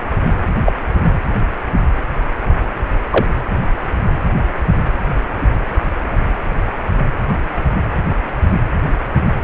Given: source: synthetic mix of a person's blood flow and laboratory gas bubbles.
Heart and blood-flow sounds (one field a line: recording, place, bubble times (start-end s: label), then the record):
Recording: Doppler ultrasound of blood flow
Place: precordium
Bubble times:
0.65-0.72 s: bubbles
3.10-3.26 s: bubbles
From the record:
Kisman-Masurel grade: 123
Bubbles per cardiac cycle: 1 to 2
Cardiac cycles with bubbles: 10 to 50%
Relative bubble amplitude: loud (0.450 to 0.775)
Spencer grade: 2 (many but less than half of the cardiac periods contain bubble signals, singularly or in groups)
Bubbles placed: anywhere in the cardiac cycle